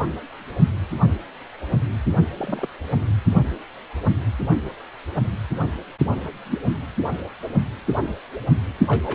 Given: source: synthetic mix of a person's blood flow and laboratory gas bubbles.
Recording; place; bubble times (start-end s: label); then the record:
Doppler ultrasound of blood flow; precordium
2.37-2.69 s: bubbles
2.93-3.01 s: bubbles
6.50-6.58 s: bubbles
8.88-9.15 s: bubbles
From the record:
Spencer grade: 2 (many but less than half of the cardiac periods contain bubble signals, singularly or in groups); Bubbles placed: only in the low amplitude regions of the cardiac cycle